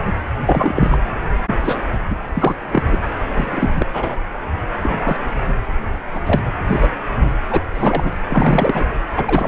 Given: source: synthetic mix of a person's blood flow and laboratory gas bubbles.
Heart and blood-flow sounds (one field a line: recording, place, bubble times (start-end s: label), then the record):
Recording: Doppler ultrasound of blood flow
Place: precordium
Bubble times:
0.46-0.98 s: bubbles
1.61-1.83 s: bubbles
2.09-2.17 s: bubbles
2.34-2.55 s: bubbles
2.71-2.83 s: bubbles
2.86-2.99 s: bubbles
3.33-3.86 s: bubbles
3.93-4.17 s: bubbles
4.82-5.17 s: bubbles
5.47-5.53 s: bubbles
6.14-6.21 s: bubbles
6.26-6.42 s: bubbles
6.67-6.89 s: bubbles
7.05-7.33 s: bubbles
7.50-7.61 s: bubbles
7.73-8.12 s: bubbles
8.29-8.86 s: bubbles
9.15-9.47 s: bubbles
From the record:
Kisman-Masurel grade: 233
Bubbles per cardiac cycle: several, 3 to 8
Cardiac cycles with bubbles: 50 to 99%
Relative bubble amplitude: loud (0.450 to 0.775)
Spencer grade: 3 (all of the cardiac periods contain showers or single bubble signals, but not dominating or overriding the cardiac motion signals)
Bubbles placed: anywhere in the cardiac cycle